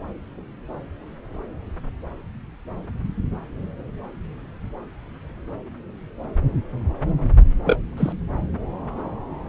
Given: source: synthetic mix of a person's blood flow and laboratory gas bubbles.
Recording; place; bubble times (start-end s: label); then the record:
Doppler ultrasound of blood flow; subclavian vein
7.66-7.79 s: bubbles
7.97-8.12 s: bubbles
From the record:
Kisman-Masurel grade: 112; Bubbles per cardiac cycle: 1 to 2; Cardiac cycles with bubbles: 1 to 10%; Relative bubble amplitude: moderate (0.250 to 0.450); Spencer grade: 1 (occasional bubble signal discernible with the cardiac motion signal, with majority of cardiac periods free of bubbles); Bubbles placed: anywhere in the cardiac cycle